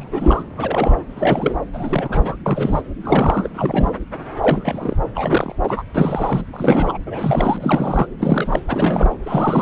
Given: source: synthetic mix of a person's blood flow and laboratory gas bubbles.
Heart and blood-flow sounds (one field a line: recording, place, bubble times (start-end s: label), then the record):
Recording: Doppler ultrasound of blood flow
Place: subclavian vein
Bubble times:
0.00-0.45 s: bubbles
0.58-1.03 s: bubbles
1.09-1.56 s: bubbles
1.73-2.36 s: bubbles
2.46-2.82 s: bubbles
3.01-3.48 s: bubbles
3.53-3.91 s: bubbles
4.42-4.98 s: bubbles
5.15-5.56 s: bubbles
5.63-5.83 s: bubbles
5.95-6.44 s: bubbles
6.53-6.98 s: bubbles
7.06-8.08 s: bubbles
8.19-8.62 s: bubbles
8.68-9.18 s: bubbles
9.23-9.62 s: bubbles
From the record:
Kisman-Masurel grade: 342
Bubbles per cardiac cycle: rolling drumbeat, 9 or more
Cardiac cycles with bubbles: 100%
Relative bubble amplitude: moderate (0.250 to 0.450)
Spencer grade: 3 (all of the cardiac periods contain showers or single bubble signals, but not dominating or overriding the cardiac motion signals)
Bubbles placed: anywhere in the cardiac cycle